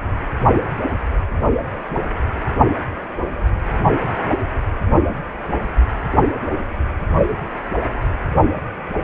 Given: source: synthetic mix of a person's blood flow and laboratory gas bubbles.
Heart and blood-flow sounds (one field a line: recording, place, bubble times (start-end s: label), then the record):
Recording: Doppler ultrasound of blood flow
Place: precordium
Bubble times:
no bubbles
From the record:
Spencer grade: 0 (complete lack of bubble signals)